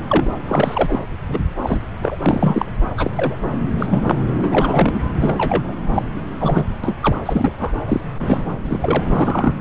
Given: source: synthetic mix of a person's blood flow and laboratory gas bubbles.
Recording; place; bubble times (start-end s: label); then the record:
Doppler ultrasound of blood flow; subclavian vein
0.09-0.30 s: bubbles
0.48-0.99 s: bubbles
1.27-1.40 s: bubbles
1.63-1.86 s: bubbles
2.02-2.17 s: bubbles
2.22-2.65 s: bubbles
2.97-3.10 s: bubbles
3.15-3.35 s: bubbles
3.79-3.86 s: bubbles
3.90-4.20 s: bubbles
4.37-5.03 s: bubbles
5.21-5.74 s: bubbles
5.93-6.03 s: bubbles
6.16-6.21 s: bubbles
6.38-6.63 s: bubbles
6.83-6.96 s: bubbles
7.00-7.16 s: bubbles
7.25-7.50 s: bubbles
7.58-7.71 s: bubbles
7.88-8.00 s: bubbles
8.25-8.43 s: bubbles
8.64-9.56 s: bubbles
From the record:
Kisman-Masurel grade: 243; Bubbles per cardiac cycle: several, 3 to 8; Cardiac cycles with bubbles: 100%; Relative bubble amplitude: loud (0.450 to 0.775); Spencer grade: 3 (all of the cardiac periods contain showers or single bubble signals, but not dominating or overriding the cardiac motion signals); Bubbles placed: anywhere in the cardiac cycle